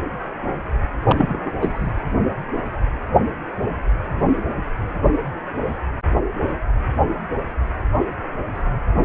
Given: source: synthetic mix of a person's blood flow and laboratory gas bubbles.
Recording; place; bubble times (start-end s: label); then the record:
Doppler ultrasound of blood flow; precordium
1.07-1.51 s: bubbles
1.61-1.93 s: bubbles
From the record:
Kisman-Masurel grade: 212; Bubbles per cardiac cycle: several, 3 to 8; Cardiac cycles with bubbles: 1 to 10%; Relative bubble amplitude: moderate (0.250 to 0.450); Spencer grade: 1 (occasional bubble signal discernible with the cardiac motion signal, with majority of cardiac periods free of bubbles); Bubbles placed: anywhere in the cardiac cycle